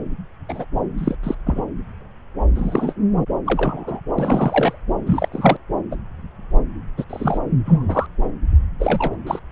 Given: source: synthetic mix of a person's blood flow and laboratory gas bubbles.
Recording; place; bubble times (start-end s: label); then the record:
Doppler ultrasound of blood flow; subclavian vein
0.49-0.65 s: bubbles
0.97-1.16 s: bubbles
1.23-1.35 s: bubbles
1.45-1.62 s: bubbles
2.55-2.93 s: bubbles
3.45-4.00 s: bubbles
4.18-4.79 s: bubbles
5.06-5.29 s: bubbles
5.31-5.57 s: bubbles
5.91-5.96 s: bubbles
6.97-7.04 s: bubbles
7.09-7.38 s: bubbles
7.65-8.06 s: bubbles
8.79-9.17 s: bubbles
9.27-9.39 s: bubbles
From the record:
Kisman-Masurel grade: 232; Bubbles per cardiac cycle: several, 3 to 8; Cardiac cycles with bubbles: 50 to 99%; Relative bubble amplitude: moderate (0.250 to 0.450); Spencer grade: 3 (all of the cardiac periods contain showers or single bubble signals, but not dominating or overriding the cardiac motion signals); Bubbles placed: anywhere in the cardiac cycle